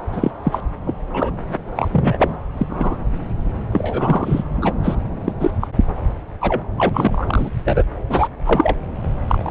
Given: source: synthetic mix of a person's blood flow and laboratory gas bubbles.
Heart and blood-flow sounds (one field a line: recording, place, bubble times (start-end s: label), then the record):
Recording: Doppler ultrasound of blood flow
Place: subclavian vein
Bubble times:
0.12-0.31 s: bubbles
0.43-0.60 s: bubbles
0.86-0.94 s: bubbles
1.13-1.31 s: bubbles
1.76-1.89 s: bubbles
1.92-2.36 s: bubbles
2.58-2.67 s: bubbles
2.69-2.96 s: bubbles
3.73-4.43 s: bubbles
4.62-4.72 s: bubbles
4.83-4.96 s: bubbles
5.24-5.33 s: bubbles
5.39-5.50 s: bubbles
5.61-5.67 s: bubbles
6.41-6.63 s: bubbles
6.77-6.90 s: bubbles
6.94-7.50 s: bubbles
7.65-7.83 s: bubbles
8.09-8.28 s: bubbles
8.44-8.76 s: bubbles
9.28-9.51 s: bubbles
From the record:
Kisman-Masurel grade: 243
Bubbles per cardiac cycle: several, 3 to 8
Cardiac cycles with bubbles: 100%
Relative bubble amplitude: loud (0.450 to 0.775)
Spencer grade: 3 (all of the cardiac periods contain showers or single bubble signals, but not dominating or overriding the cardiac motion signals)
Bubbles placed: anywhere in the cardiac cycle